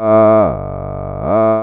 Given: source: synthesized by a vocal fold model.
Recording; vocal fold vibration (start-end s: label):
sustained vowel that changes in the middle
0.00-0.38 s: 109.8 Hz, open quotient 0.31
0.58-1.18 s: 48.0 Hz, open quotient 0.33
1.38-1.63 s: 109.8 Hz, open quotient 0.31